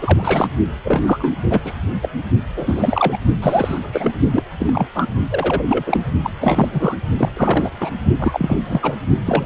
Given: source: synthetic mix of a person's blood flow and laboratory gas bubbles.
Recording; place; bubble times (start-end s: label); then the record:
Doppler ultrasound of blood flow; precordium
0.00-0.48 s: bubbles
0.84-1.34 s: bubbles
1.50-1.61 s: bubbles
1.64-1.73 s: bubbles
2.02-2.08 s: bubbles
2.55-3.18 s: bubbles
3.42-3.79 s: bubbles
3.83-4.12 s: bubbles
4.33-4.42 s: bubbles
4.59-4.87 s: bubbles
4.95-5.08 s: bubbles
5.31-5.63 s: bubbles
5.67-6.03 s: bubbles
6.24-6.30 s: bubbles
6.41-6.97 s: bubbles
7.17-7.29 s: bubbles
7.37-7.71 s: bubbles
7.80-7.90 s: bubbles
8.20-8.60 s: bubbles
8.65-8.96 s: bubbles
9.27-9.46 s: bubbles
From the record:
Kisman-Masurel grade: 343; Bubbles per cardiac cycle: rolling drumbeat, 9 or more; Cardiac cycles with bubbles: 100%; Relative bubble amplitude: loud (0.450 to 0.775); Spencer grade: 3 (all of the cardiac periods contain showers or single bubble signals, but not dominating or overriding the cardiac motion signals); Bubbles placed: only in the low amplitude regions of the cardiac cycle